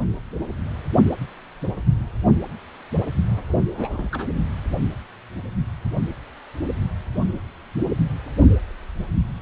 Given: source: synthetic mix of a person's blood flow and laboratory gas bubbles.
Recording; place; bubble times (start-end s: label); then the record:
Doppler ultrasound of blood flow; precordium
3.75-4.26 s: bubbles
From the record:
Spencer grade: 1 (occasional bubble signal discernible with the cardiac motion signal, with majority of cardiac periods free of bubbles); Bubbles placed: only in the low amplitude regions of the cardiac cycle